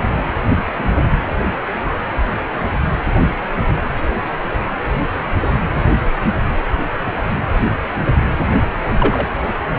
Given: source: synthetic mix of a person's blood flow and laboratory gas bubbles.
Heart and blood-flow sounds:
Doppler ultrasound of blood flow; precordium
0.78-0.89 s: bubbles
8.99-9.26 s: bubbles
From the record:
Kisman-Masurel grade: 123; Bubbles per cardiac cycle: 1 to 2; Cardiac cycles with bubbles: 10 to 50%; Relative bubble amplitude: loud (0.450 to 0.775); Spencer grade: 2 (many but less than half of the cardiac periods contain bubble signals, singularly or in groups); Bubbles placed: anywhere in the cardiac cycle

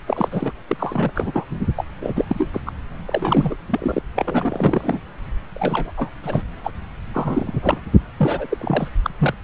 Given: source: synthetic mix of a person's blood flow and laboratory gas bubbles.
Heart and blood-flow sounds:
Doppler ultrasound of blood flow; subclavian vein
0.07-0.28 s: bubbles
0.30-0.51 s: bubbles
0.68-1.11 s: bubbles
1.15-1.45 s: bubbles
1.76-1.84 s: bubbles
2.01-2.24 s: bubbles
2.27-2.47 s: bubbles
2.52-2.60 s: bubbles
2.67-2.72 s: bubbles
3.06-3.55 s: bubbles
3.70-4.01 s: bubbles
4.15-5.00 s: bubbles
5.54-5.92 s: bubbles
5.97-6.09 s: bubbles
6.23-6.42 s: bubbles
6.63-6.71 s: bubbles
7.13-7.80 s: bubbles
8.19-8.46 s: bubbles
8.50-8.88 s: bubbles
9.04-9.10 s: bubbles
9.19-9.34 s: bubbles
From the record:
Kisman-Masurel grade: 342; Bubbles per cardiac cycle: rolling drumbeat, 9 or more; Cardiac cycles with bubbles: 100%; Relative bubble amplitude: moderate (0.250 to 0.450); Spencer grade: 3 (all of the cardiac periods contain showers or single bubble signals, but not dominating or overriding the cardiac motion signals); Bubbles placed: anywhere in the cardiac cycle

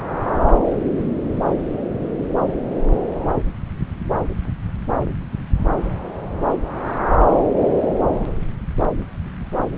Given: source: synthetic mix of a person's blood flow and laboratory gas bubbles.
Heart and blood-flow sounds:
Doppler ultrasound of blood flow; subclavian vein
no bubbles
From the record:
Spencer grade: 0 (complete lack of bubble signals)

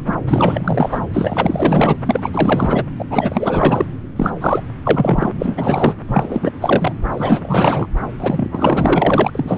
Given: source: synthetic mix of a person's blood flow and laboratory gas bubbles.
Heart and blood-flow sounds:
Doppler ultrasound of blood flow; subclavian vein
0.00-0.02 s: bubbles
0.06-0.14 s: bubbles
0.28-1.06 s: bubbles
1.14-1.97 s: bubbles
2.05-2.84 s: bubbles
2.98-3.05 s: bubbles
3.10-3.88 s: bubbles
4.16-4.30 s: bubbles
4.40-4.62 s: bubbles
4.83-5.35 s: bubbles
5.40-5.96 s: bubbles
6.07-6.98 s: bubbles
7.11-7.87 s: bubbles
8.20-9.31 s: bubbles
9.35-9.58 s: bubbles
From the record:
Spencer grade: 4 (maximum detectable bubble signal sounding continuously throughout systole and diastole of every cardiac period, and overriding the amplitude of the normal cardiac signals); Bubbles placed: anywhere in the cardiac cycle

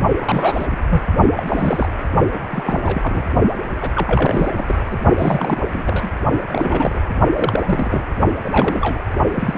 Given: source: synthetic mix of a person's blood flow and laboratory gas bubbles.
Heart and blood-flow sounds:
Doppler ultrasound of blood flow; precordium
0.22-0.67 s: bubbles
0.70-0.77 s: bubbles
0.90-1.01 s: bubbles
1.36-1.43 s: bubbles
1.47-1.89 s: bubbles
2.33-2.39 s: bubbles
2.50-3.25 s: bubbles
3.76-3.90 s: bubbles
3.94-4.74 s: bubbles
4.91-4.97 s: bubbles
5.18-5.60 s: bubbles
5.73-6.10 s: bubbles
6.51-6.99 s: bubbles
7.35-8.03 s: bubbles
8.45-8.99 s: bubbles
9.30-9.57 s: bubbles
From the record:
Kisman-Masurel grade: 332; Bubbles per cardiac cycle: rolling drumbeat, 9 or more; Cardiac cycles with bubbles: 50 to 99%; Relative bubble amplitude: moderate (0.250 to 0.450); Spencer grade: 3 (all of the cardiac periods contain showers or single bubble signals, but not dominating or overriding the cardiac motion signals); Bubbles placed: only in the low amplitude regions of the cardiac cycle

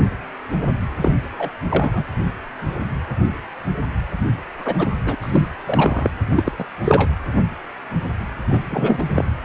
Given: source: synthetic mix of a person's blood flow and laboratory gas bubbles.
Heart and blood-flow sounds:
Doppler ultrasound of blood flow; precordium
1.01-1.11 s: bubbles
1.38-1.50 s: bubbles
1.64-2.04 s: bubbles
4.57-4.91 s: bubbles
5.05-5.16 s: bubbles
5.22-5.49 s: bubbles
5.66-6.11 s: bubbles
6.34-6.53 s: bubbles
6.58-6.64 s: bubbles
6.84-7.08 s: bubbles
8.49-8.61 s: bubbles
8.70-9.04 s: bubbles
9.14-9.25 s: bubbles
From the record:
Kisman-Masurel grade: 233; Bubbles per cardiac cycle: several, 3 to 8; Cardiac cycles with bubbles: 50 to 99%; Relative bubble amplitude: loud (0.450 to 0.775); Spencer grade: 3 (all of the cardiac periods contain showers or single bubble signals, but not dominating or overriding the cardiac motion signals); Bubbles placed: anywhere in the cardiac cycle

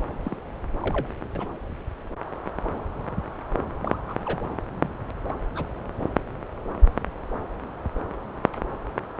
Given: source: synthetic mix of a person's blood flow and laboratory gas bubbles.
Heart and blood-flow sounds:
Doppler ultrasound of blood flow; subclavian vein
0.25-0.36 s: bubbles
0.82-1.12 s: bubbles
1.35-1.48 s: bubbles
3.80-3.99 s: bubbles
4.08-4.14 s: bubbles
4.24-4.40 s: bubbles
4.80-4.89 s: bubbles
5.29-5.38 s: bubbles
5.55-5.64 s: bubbles
From the record:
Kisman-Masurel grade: 121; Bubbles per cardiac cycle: 1 to 2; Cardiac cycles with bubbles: 10 to 50%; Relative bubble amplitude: barely perceptible (0.100 to 0.250); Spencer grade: 2 (many but less than half of the cardiac periods contain bubble signals, singularly or in groups); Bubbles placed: anywhere in the cardiac cycle

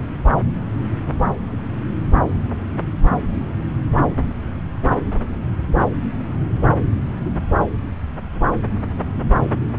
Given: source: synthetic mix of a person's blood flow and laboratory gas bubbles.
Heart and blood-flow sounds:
Doppler ultrasound of blood flow; subclavian vein
no bubbles
From the record:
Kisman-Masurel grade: 000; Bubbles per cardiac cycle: 0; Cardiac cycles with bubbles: 0%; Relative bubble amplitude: no bubbles discernible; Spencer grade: 0 (complete lack of bubble signals)

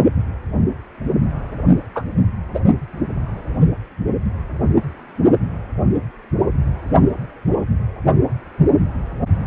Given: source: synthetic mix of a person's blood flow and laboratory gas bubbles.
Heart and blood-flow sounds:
Doppler ultrasound of blood flow; precordium
1.95-2.03 s: bubbles
2.54-2.59 s: bubbles
From the record:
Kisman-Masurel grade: 113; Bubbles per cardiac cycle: 1 to 2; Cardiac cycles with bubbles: 1 to 10%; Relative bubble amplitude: loud (0.450 to 0.775); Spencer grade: 1 (occasional bubble signal discernible with the cardiac motion signal, with majority of cardiac periods free of bubbles); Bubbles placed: only in the low amplitude regions of the cardiac cycle

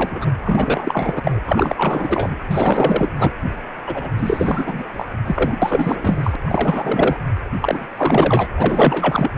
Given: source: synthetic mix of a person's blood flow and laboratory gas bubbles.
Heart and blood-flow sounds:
Doppler ultrasound of blood flow; precordium
0.00-0.30 s: bubbles
0.44-1.41 s: bubbles
1.46-2.35 s: bubbles
2.50-3.10 s: bubbles
3.17-3.32 s: bubbles
3.86-4.09 s: bubbles
4.18-4.84 s: bubbles
4.93-5.06 s: bubbles
5.24-5.59 s: bubbles
5.62-6.36 s: bubbles
6.45-7.16 s: bubbles
7.61-7.88 s: bubbles
7.96-8.48 s: bubbles
8.58-9.32 s: bubbles
From the record:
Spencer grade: 4 (maximum detectable bubble signal sounding continuously throughout systole and diastole of every cardiac period, and overriding the amplitude of the normal cardiac signals); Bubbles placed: anywhere in the cardiac cycle

